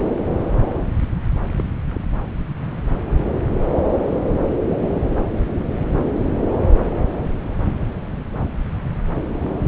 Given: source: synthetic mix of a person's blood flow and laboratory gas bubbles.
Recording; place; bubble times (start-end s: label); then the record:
Doppler ultrasound of blood flow; subclavian vein
1.56-1.72 s: bubbles
1.85-2.01 s: bubbles
From the record:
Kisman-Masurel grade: 111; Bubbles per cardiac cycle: 1 to 2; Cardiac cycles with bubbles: 1 to 10%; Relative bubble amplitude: barely perceptible (0.100 to 0.250); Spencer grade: 1 (occasional bubble signal discernible with the cardiac motion signal, with majority of cardiac periods free of bubbles); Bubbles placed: anywhere in the cardiac cycle